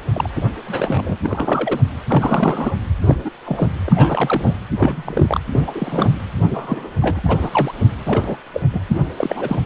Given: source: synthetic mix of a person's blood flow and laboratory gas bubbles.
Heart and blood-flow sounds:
Doppler ultrasound of blood flow; precordium
0.14-0.29 s: bubbles
0.35-0.43 s: bubbles
0.68-1.17 s: bubbles
1.23-1.80 s: bubbles
2.09-2.72 s: bubbles
3.01-3.17 s: bubbles
3.25-3.30 s: bubbles
3.46-3.67 s: bubbles
3.86-4.53 s: bubbles
4.79-5.40 s: bubbles
5.52-6.19 s: bubbles
6.46-6.90 s: bubbles
7.02-7.21 s: bubbles
7.25-7.72 s: bubbles
8.05-8.37 s: bubbles
8.54-8.62 s: bubbles
8.72-8.80 s: bubbles
8.88-9.01 s: bubbles
9.18-9.60 s: bubbles
From the record:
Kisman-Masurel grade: 242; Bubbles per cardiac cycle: several, 3 to 8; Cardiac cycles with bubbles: 100%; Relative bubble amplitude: moderate (0.250 to 0.450); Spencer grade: 3 (all of the cardiac periods contain showers or single bubble signals, but not dominating or overriding the cardiac motion signals); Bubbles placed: anywhere in the cardiac cycle

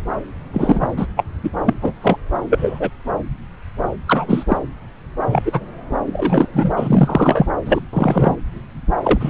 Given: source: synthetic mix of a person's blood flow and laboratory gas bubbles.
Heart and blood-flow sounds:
Doppler ultrasound of blood flow; subclavian vein
0.53-0.88 s: bubbles
0.97-1.06 s: bubbles
1.16-1.24 s: bubbles
1.44-1.50 s: bubbles
1.65-1.73 s: bubbles
1.81-1.92 s: bubbles
2.02-2.17 s: bubbles
2.50-2.90 s: bubbles
4.07-4.46 s: bubbles
4.48-4.57 s: bubbles
5.27-5.41 s: bubbles
5.45-5.60 s: bubbles
6.07-6.47 s: bubbles
6.53-7.46 s: bubbles
7.65-7.80 s: bubbles
7.93-8.35 s: bubbles
9.03-9.30 s: bubbles
From the record:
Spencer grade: 3 (all of the cardiac periods contain showers or single bubble signals, but not dominating or overriding the cardiac motion signals); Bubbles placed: anywhere in the cardiac cycle

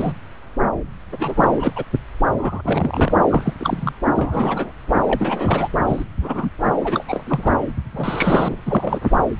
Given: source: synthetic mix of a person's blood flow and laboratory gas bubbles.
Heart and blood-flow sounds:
Doppler ultrasound of blood flow; subclavian vein
0.00-0.13 s: bubbles
1.12-1.48 s: bubbles
1.58-1.72 s: bubbles
1.76-1.84 s: bubbles
2.38-3.12 s: bubbles
3.29-3.54 s: bubbles
3.60-3.93 s: bubbles
4.15-4.72 s: bubbles
5.07-5.68 s: bubbles
5.86-6.04 s: bubbles
6.21-6.50 s: bubbles
6.81-7.04 s: bubbles
7.08-7.23 s: bubbles
7.26-7.57 s: bubbles
7.92-8.55 s: bubbles
8.66-8.99 s: bubbles
From the record:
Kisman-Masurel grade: 232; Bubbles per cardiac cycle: several, 3 to 8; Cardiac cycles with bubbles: 50 to 99%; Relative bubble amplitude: moderate (0.250 to 0.450); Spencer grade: 3 (all of the cardiac periods contain showers or single bubble signals, but not dominating or overriding the cardiac motion signals); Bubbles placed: anywhere in the cardiac cycle

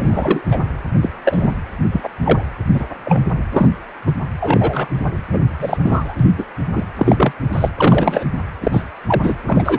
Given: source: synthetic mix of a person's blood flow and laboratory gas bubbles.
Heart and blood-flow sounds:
Doppler ultrasound of blood flow; precordium
0.00-0.59 s: bubbles
1.01-1.10 s: bubbles
1.25-1.58 s: bubbles
1.92-2.09 s: bubbles
2.24-2.42 s: bubbles
2.74-2.84 s: bubbles
3.04-3.23 s: bubbles
3.51-3.70 s: bubbles
4.06-4.12 s: bubbles
4.40-4.88 s: bubbles
5.32-5.42 s: bubbles
5.58-5.78 s: bubbles
5.83-6.16 s: bubbles
6.19-6.30 s: bubbles
6.38-6.45 s: bubbles
6.75-6.84 s: bubbles
6.96-7.33 s: bubbles
7.53-7.69 s: bubbles
7.77-8.24 s: bubbles
8.62-8.84 s: bubbles
9.08-9.36 s: bubbles
9.47-9.79 s: bubbles
From the record:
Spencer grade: 3 (all of the cardiac periods contain showers or single bubble signals, but not dominating or overriding the cardiac motion signals); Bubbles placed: anywhere in the cardiac cycle

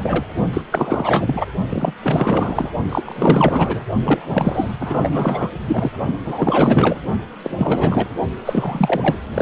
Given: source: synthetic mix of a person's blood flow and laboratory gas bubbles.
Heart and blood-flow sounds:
Doppler ultrasound of blood flow; precordium
0.00-0.25 s: bubbles
0.53-0.61 s: bubbles
0.71-1.48 s: bubbles
1.69-1.93 s: bubbles
2.02-2.72 s: bubbles
2.89-3.84 s: bubbles
4.04-4.76 s: bubbles
4.80-5.50 s: bubbles
5.67-5.91 s: bubbles
6.25-6.98 s: bubbles
7.43-8.09 s: bubbles
8.45-9.16 s: bubbles
9.34-9.42 s: bubbles
From the record:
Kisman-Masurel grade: 444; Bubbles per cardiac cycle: continuous sound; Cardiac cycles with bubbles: 100%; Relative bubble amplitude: maximal (0.775 to 0.999); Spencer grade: 4 (maximum detectable bubble signal sounding continuously throughout systole and diastole of every cardiac period, and overriding the amplitude of the normal cardiac signals); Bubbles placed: only in the low amplitude regions of the cardiac cycle

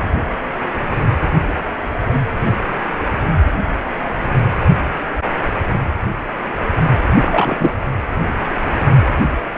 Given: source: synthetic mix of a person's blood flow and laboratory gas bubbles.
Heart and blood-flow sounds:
Doppler ultrasound of blood flow; precordium
7.21-7.56 s: bubbles
7.58-7.74 s: bubbles
From the record:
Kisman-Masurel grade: 113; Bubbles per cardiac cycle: 1 to 2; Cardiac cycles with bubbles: 1 to 10%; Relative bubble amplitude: loud (0.450 to 0.775); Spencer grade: 1 (occasional bubble signal discernible with the cardiac motion signal, with majority of cardiac periods free of bubbles); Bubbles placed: anywhere in the cardiac cycle

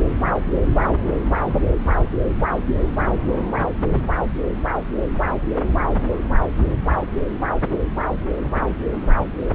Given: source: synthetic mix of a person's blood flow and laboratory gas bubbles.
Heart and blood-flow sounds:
Doppler ultrasound of blood flow; subclavian vein
no bubbles
From the record:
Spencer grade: 0 (complete lack of bubble signals)

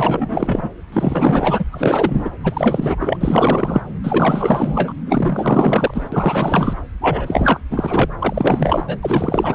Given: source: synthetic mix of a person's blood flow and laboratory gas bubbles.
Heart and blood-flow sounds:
Doppler ultrasound of blood flow; subclavian vein
0.00-0.71 s: bubbles
0.92-1.64 s: bubbles
1.72-2.29 s: bubbles
2.43-2.95 s: bubbles
2.98-3.17 s: bubbles
3.20-3.81 s: bubbles
4.04-4.93 s: bubbles
5.07-6.74 s: bubbles
7.01-7.60 s: bubbles
7.70-8.05 s: bubbles
8.18-8.97 s: bubbles
9.01-9.55 s: bubbles
From the record:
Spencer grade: 4 (maximum detectable bubble signal sounding continuously throughout systole and diastole of every cardiac period, and overriding the amplitude of the normal cardiac signals); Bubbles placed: anywhere in the cardiac cycle

